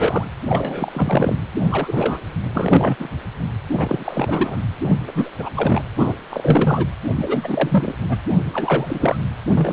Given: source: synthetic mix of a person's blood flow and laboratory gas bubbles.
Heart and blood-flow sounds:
Doppler ultrasound of blood flow; precordium
0.00-0.25 s: bubbles
0.49-1.35 s: bubbles
1.60-1.67 s: bubbles
1.69-2.20 s: bubbles
2.55-2.96 s: bubbles
2.99-3.10 s: bubbles
3.71-4.58 s: bubbles
4.83-4.96 s: bubbles
5.07-5.31 s: bubbles
5.39-5.50 s: bubbles
5.55-5.82 s: bubbles
5.97-6.13 s: bubbles
6.29-6.87 s: bubbles
7.16-8.21 s: bubbles
8.53-9.17 s: bubbles
9.46-9.73 s: bubbles
From the record:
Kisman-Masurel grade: 343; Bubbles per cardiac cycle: rolling drumbeat, 9 or more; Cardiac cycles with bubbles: 100%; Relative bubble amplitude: loud (0.450 to 0.775); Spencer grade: 3 (all of the cardiac periods contain showers or single bubble signals, but not dominating or overriding the cardiac motion signals); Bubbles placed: anywhere in the cardiac cycle

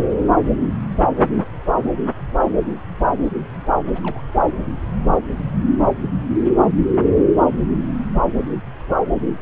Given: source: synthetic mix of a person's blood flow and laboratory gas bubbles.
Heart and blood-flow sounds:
Doppler ultrasound of blood flow; subclavian vein
3.86-4.21 s: bubbles
From the record:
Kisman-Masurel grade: 211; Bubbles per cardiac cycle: several, 3 to 8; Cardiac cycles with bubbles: 1 to 10%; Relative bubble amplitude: barely perceptible (0.100 to 0.250); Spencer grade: 1 (occasional bubble signal discernible with the cardiac motion signal, with majority of cardiac periods free of bubbles); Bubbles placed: anywhere in the cardiac cycle

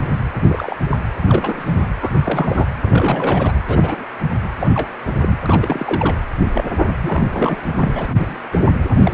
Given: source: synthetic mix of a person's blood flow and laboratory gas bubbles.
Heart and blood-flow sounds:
Doppler ultrasound of blood flow; precordium
0.43-0.77 s: bubbles
0.91-0.97 s: bubbles
1.22-1.87 s: bubbles
2.00-2.68 s: bubbles
2.83-3.52 s: bubbles
3.69-4.05 s: bubbles
4.58-4.90 s: bubbles
5.20-5.38 s: bubbles
5.45-6.17 s: bubbles
6.53-6.64 s: bubbles
7.01-7.56 s: bubbles
7.76-8.38 s: bubbles
8.52-8.60 s: bubbles
8.95-8.97 s: bubbles
9.02-9.14 s: bubbles
From the record:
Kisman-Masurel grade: 232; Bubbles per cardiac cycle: several, 3 to 8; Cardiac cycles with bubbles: 50 to 99%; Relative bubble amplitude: moderate (0.250 to 0.450); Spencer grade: 3 (all of the cardiac periods contain showers or single bubble signals, but not dominating or overriding the cardiac motion signals); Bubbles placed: anywhere in the cardiac cycle

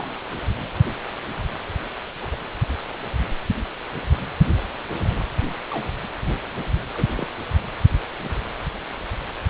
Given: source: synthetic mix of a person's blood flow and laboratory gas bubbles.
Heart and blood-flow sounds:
Doppler ultrasound of blood flow; precordium
0.00-0.20 s: bubbles
2.22-2.36 s: bubbles
5.71-5.88 s: bubbles
6.95-7.27 s: bubbles
8.23-8.29 s: bubbles
From the record:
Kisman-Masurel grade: 121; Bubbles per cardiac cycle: 1 to 2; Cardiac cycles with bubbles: 10 to 50%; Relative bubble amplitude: barely perceptible (0.100 to 0.250); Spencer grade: 2 (many but less than half of the cardiac periods contain bubble signals, singularly or in groups); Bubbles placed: anywhere in the cardiac cycle

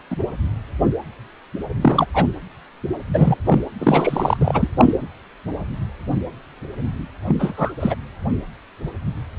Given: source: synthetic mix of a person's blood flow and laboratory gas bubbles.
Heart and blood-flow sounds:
Doppler ultrasound of blood flow; precordium
0.10-0.17 s: bubbles
1.81-2.06 s: bubbles
2.13-2.27 s: bubbles
3.13-3.35 s: bubbles
3.45-3.59 s: bubbles
3.79-4.37 s: bubbles
4.41-4.68 s: bubbles
4.77-4.93 s: bubbles
7.27-7.36 s: bubbles
7.39-7.74 s: bubbles
7.80-7.96 s: bubbles
From the record:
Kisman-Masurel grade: 223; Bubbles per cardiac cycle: several, 3 to 8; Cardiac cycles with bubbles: 10 to 50%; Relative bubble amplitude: loud (0.450 to 0.775); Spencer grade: 2 (many but less than half of the cardiac periods contain bubble signals, singularly or in groups); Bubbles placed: anywhere in the cardiac cycle

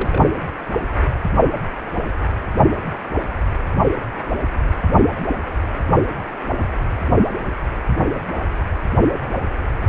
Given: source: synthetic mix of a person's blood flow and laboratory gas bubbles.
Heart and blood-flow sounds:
Doppler ultrasound of blood flow; precordium
0.00-0.27 s: bubbles
From the record:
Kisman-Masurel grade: 211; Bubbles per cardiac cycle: several, 3 to 8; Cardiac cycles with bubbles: 1 to 10%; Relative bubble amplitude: barely perceptible (0.100 to 0.250); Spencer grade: 1 (occasional bubble signal discernible with the cardiac motion signal, with majority of cardiac periods free of bubbles); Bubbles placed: anywhere in the cardiac cycle

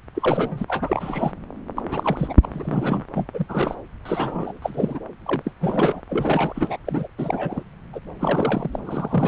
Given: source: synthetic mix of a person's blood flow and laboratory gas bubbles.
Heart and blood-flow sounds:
Doppler ultrasound of blood flow; subclavian vein
0.14-0.65 s: bubbles
0.68-1.32 s: bubbles
1.76-1.82 s: bubbles
1.91-2.33 s: bubbles
2.43-2.48 s: bubbles
2.51-3.04 s: bubbles
3.14-3.28 s: bubbles
3.34-3.75 s: bubbles
4.05-4.58 s: bubbles
4.62-5.00 s: bubbles
5.25-5.42 s: bubbles
5.45-5.51 s: bubbles
5.60-6.00 s: bubbles
6.09-6.76 s: bubbles
6.86-7.08 s: bubbles
7.18-7.63 s: bubbles
7.93-7.99 s: bubbles
8.19-8.79 s: bubbles
8.85-9.28 s: bubbles
From the record:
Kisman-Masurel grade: 342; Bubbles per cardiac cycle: rolling drumbeat, 9 or more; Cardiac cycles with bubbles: 100%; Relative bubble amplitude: moderate (0.250 to 0.450); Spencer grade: 3 (all of the cardiac periods contain showers or single bubble signals, but not dominating or overriding the cardiac motion signals); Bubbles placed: anywhere in the cardiac cycle

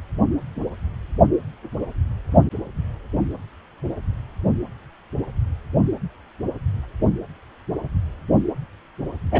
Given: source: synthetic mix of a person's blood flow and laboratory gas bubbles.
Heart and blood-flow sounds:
Doppler ultrasound of blood flow; precordium
9.32-9.40 s: bubbles
From the record:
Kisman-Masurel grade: 113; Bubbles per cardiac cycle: 1 to 2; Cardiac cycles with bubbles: 1 to 10%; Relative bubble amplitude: loud (0.450 to 0.775); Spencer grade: 1 (occasional bubble signal discernible with the cardiac motion signal, with majority of cardiac periods free of bubbles); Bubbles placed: anywhere in the cardiac cycle

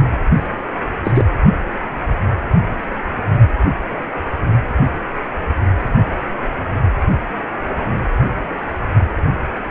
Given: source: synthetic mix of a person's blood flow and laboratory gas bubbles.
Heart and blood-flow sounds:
Doppler ultrasound of blood flow; precordium
1.04-1.25 s: bubbles
From the record:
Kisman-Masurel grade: 113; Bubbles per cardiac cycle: 1 to 2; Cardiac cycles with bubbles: 1 to 10%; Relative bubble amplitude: loud (0.450 to 0.775); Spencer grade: 1 (occasional bubble signal discernible with the cardiac motion signal, with majority of cardiac periods free of bubbles); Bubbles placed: only in the low amplitude regions of the cardiac cycle

